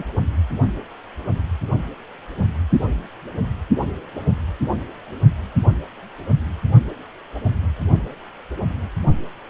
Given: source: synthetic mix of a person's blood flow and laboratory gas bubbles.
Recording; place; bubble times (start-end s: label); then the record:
Doppler ultrasound of blood flow; precordium
0.00-0.03 s: bubbles
From the record:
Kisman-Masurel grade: 112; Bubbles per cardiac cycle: 1 to 2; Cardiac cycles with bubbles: 1 to 10%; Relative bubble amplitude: moderate (0.250 to 0.450); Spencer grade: 1 (occasional bubble signal discernible with the cardiac motion signal, with majority of cardiac periods free of bubbles); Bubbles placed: only in the low amplitude regions of the cardiac cycle